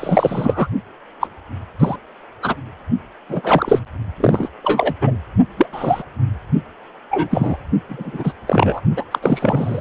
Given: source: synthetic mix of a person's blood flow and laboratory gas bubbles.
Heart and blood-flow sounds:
Doppler ultrasound of blood flow; precordium
0.00-0.67 s: bubbles
1.20-1.27 s: bubbles
1.79-1.96 s: bubbles
2.42-2.55 s: bubbles
3.29-3.79 s: bubbles
4.20-4.49 s: bubbles
4.64-4.94 s: bubbles
5.01-5.16 s: bubbles
5.57-5.66 s: bubbles
5.72-6.03 s: bubbles
7.11-7.57 s: bubbles
7.89-8.32 s: bubbles
8.47-8.80 s: bubbles
8.96-9.04 s: bubbles
9.11-9.18 s: bubbles
9.22-9.81 s: bubbles
From the record:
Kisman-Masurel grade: 243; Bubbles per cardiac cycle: several, 3 to 8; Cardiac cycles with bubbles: 100%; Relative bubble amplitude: loud (0.450 to 0.775); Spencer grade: 3 (all of the cardiac periods contain showers or single bubble signals, but not dominating or overriding the cardiac motion signals); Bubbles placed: only in the low amplitude regions of the cardiac cycle

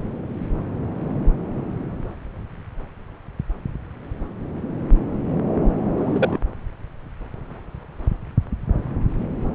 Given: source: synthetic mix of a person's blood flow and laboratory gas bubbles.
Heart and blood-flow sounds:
Doppler ultrasound of blood flow; subclavian vein
5.97-6.38 s: bubbles
From the record:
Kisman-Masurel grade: 113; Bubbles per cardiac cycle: 1 to 2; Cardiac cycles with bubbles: 1 to 10%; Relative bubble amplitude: loud (0.450 to 0.775); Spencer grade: 1 (occasional bubble signal discernible with the cardiac motion signal, with majority of cardiac periods free of bubbles); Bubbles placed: anywhere in the cardiac cycle

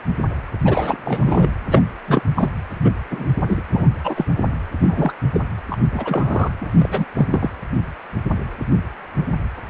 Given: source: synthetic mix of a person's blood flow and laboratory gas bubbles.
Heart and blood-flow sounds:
Doppler ultrasound of blood flow; precordium
0.65-0.98 s: bubbles
1.05-1.50 s: bubbles
1.69-1.82 s: bubbles
2.07-2.22 s: bubbles
2.35-2.48 s: bubbles
2.84-2.91 s: bubbles
3.10-3.26 s: bubbles
3.48-3.63 s: bubbles
3.71-3.87 s: bubbles
4.04-4.25 s: bubbles
4.81-5.13 s: bubbles
5.33-5.41 s: bubbles
5.69-5.77 s: bubbles
5.90-6.50 s: bubbles
6.61-6.67 s: bubbles
6.75-7.58 s: bubbles
From the record:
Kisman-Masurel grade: 233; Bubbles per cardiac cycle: several, 3 to 8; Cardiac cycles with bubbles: 50 to 99%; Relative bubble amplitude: loud (0.450 to 0.775); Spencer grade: 3 (all of the cardiac periods contain showers or single bubble signals, but not dominating or overriding the cardiac motion signals); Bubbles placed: anywhere in the cardiac cycle

